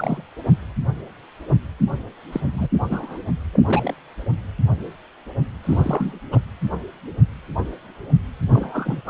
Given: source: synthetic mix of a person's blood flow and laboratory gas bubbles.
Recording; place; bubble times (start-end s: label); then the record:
Doppler ultrasound of blood flow; precordium
0.00-0.22 s: bubbles
2.32-2.41 s: bubbles
2.53-2.68 s: bubbles
2.90-3.17 s: bubbles
3.53-3.93 s: bubbles
5.64-6.13 s: bubbles
6.32-6.41 s: bubbles
8.49-9.01 s: bubbles
9.06-9.10 s: bubbles
From the record:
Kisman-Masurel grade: 222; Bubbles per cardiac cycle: several, 3 to 8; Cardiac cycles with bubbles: 10 to 50%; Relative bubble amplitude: moderate (0.250 to 0.450); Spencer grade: 2 (many but less than half of the cardiac periods contain bubble signals, singularly or in groups); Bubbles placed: anywhere in the cardiac cycle